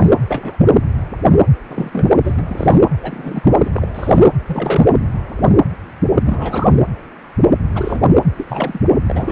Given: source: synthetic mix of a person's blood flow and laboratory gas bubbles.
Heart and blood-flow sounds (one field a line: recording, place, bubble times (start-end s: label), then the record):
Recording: Doppler ultrasound of blood flow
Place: precordium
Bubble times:
0.00-0.09 s: bubbles
0.28-0.56 s: bubbles
0.72-0.79 s: bubbles
1.68-2.07 s: bubbles
2.23-2.43 s: bubbles
2.48-2.78 s: bubbles
3.01-3.60 s: bubbles
3.63-3.71 s: bubbles
3.75-3.86 s: bubbles
3.94-4.19 s: bubbles
4.46-4.93 s: bubbles
6.25-6.74 s: bubbles
7.75-8.07 s: bubbles
8.36-8.46 s: bubbles
8.48-8.81 s: bubbles
9.06-9.32 s: bubbles
From the record:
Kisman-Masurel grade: 232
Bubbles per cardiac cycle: several, 3 to 8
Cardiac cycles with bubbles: 50 to 99%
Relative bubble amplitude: moderate (0.250 to 0.450)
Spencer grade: 3 (all of the cardiac periods contain showers or single bubble signals, but not dominating or overriding the cardiac motion signals)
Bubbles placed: anywhere in the cardiac cycle